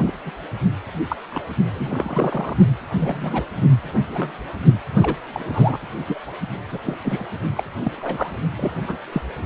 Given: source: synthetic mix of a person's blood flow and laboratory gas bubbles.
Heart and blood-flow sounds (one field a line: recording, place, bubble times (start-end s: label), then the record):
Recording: Doppler ultrasound of blood flow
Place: precordium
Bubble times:
0.00-0.11 s: bubbles
0.25-0.32 s: bubbles
1.08-1.17 s: bubbles
1.30-1.42 s: bubbles
1.74-2.57 s: bubbles
3.00-3.45 s: bubbles
4.08-4.32 s: bubbles
5.00-5.17 s: bubbles
5.34-5.78 s: bubbles
6.07-6.21 s: bubbles
6.69-6.80 s: bubbles
6.85-6.97 s: bubbles
7.03-7.23 s: bubbles
7.55-7.63 s: bubbles
7.84-7.92 s: bubbles
7.96-8.35 s: bubbles
8.56-8.71 s: bubbles
8.83-8.97 s: bubbles
9.12-9.21 s: bubbles
From the record:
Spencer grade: 3 (all of the cardiac periods contain showers or single bubble signals, but not dominating or overriding the cardiac motion signals)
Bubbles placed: only in the low amplitude regions of the cardiac cycle